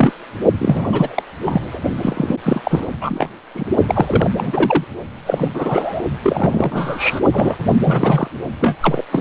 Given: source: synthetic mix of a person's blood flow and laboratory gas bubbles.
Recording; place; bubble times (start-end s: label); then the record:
Doppler ultrasound of blood flow; precordium
0.00-0.12 s: bubbles
0.58-1.23 s: bubbles
1.46-1.79 s: bubbles
2.02-2.36 s: bubbles
2.44-2.60 s: bubbles
2.64-2.85 s: bubbles
3.00-3.29 s: bubbles
3.54-3.64 s: bubbles
3.86-4.30 s: bubbles
4.38-4.84 s: bubbles
5.25-5.49 s: bubbles
5.53-6.02 s: bubbles
6.23-7.20 s: bubbles
7.31-7.56 s: bubbles
7.84-8.28 s: bubbles
8.60-8.76 s: bubbles
8.80-9.04 s: bubbles
9.12-9.21 s: bubbles
From the record:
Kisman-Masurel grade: 343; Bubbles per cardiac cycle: rolling drumbeat, 9 or more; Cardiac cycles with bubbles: 100%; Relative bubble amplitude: loud (0.450 to 0.775); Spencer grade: 3 (all of the cardiac periods contain showers or single bubble signals, but not dominating or overriding the cardiac motion signals); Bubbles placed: only in the low amplitude regions of the cardiac cycle